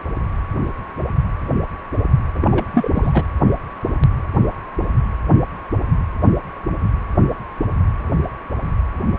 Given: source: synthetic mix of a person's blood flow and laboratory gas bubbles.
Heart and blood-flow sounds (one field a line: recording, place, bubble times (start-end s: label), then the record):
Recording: Doppler ultrasound of blood flow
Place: precordium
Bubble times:
2.34-2.38 s: bubbles
2.41-2.66 s: bubbles
2.72-2.88 s: bubbles
2.93-3.24 s: bubbles
From the record:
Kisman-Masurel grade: 212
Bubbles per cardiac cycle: several, 3 to 8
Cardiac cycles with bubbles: 1 to 10%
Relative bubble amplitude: moderate (0.250 to 0.450)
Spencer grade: 1 (occasional bubble signal discernible with the cardiac motion signal, with majority of cardiac periods free of bubbles)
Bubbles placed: anywhere in the cardiac cycle